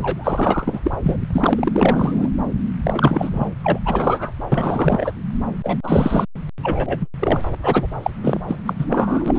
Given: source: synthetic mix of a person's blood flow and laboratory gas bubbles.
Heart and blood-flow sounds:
Doppler ultrasound of blood flow; subclavian vein
0.01-0.80 s: bubbles
0.83-0.92 s: bubbles
1.03-1.17 s: bubbles
1.30-2.29 s: bubbles
2.83-3.48 s: bubbles
3.63-3.79 s: bubbles
3.85-4.31 s: bubbles
4.52-5.13 s: bubbles
5.64-5.77 s: bubbles
5.83-6.26 s: bubbles
6.62-7.08 s: bubbles
7.19-7.41 s: bubbles
7.62-7.87 s: bubbles
8.03-8.10 s: bubbles
8.23-8.41 s: bubbles
8.47-8.56 s: bubbles
8.65-8.73 s: bubbles
8.79-8.85 s: bubbles
8.92-9.38 s: bubbles
From the record:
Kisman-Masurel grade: 444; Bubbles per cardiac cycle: continuous sound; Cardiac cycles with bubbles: 100%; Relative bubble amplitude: maximal (0.775 to 0.999); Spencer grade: 4 (maximum detectable bubble signal sounding continuously throughout systole and diastole of every cardiac period, and overriding the amplitude of the normal cardiac signals); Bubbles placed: anywhere in the cardiac cycle

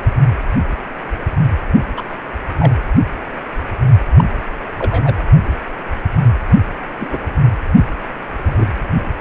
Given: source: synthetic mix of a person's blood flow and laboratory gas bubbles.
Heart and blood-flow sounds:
Doppler ultrasound of blood flow; precordium
1.96-2.04 s: bubbles
2.59-2.73 s: bubbles
4.17-4.25 s: bubbles
4.79-5.14 s: bubbles
6.99-7.18 s: bubbles
8.46-8.66 s: bubbles
From the record:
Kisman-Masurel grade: 122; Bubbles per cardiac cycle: 1 to 2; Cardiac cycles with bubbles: 10 to 50%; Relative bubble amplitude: moderate (0.250 to 0.450); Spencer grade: 2 (many but less than half of the cardiac periods contain bubble signals, singularly or in groups); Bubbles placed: anywhere in the cardiac cycle

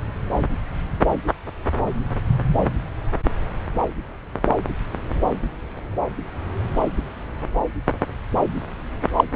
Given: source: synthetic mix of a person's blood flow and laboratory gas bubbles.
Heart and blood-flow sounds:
Doppler ultrasound of blood flow; subclavian vein
9.16-9.24 s: bubbles
From the record:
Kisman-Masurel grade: 113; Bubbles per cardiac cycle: 1 to 2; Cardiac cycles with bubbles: 1 to 10%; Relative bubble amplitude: loud (0.450 to 0.775); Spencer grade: 1 (occasional bubble signal discernible with the cardiac motion signal, with majority of cardiac periods free of bubbles); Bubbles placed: anywhere in the cardiac cycle

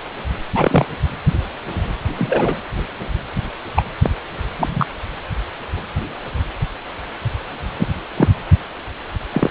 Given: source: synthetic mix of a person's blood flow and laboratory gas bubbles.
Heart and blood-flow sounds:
Doppler ultrasound of blood flow; precordium
0.54-0.86 s: bubbles
2.17-2.59 s: bubbles
3.75-3.84 s: bubbles
4.02-4.10 s: bubbles
4.58-4.85 s: bubbles
7.77-7.88 s: bubbles
8.16-8.29 s: bubbles
9.32-9.50 s: bubbles
From the record:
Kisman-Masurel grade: 123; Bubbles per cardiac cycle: 1 to 2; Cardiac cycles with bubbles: 10 to 50%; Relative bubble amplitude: loud (0.450 to 0.775); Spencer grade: 2 (many but less than half of the cardiac periods contain bubble signals, singularly or in groups); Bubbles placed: anywhere in the cardiac cycle

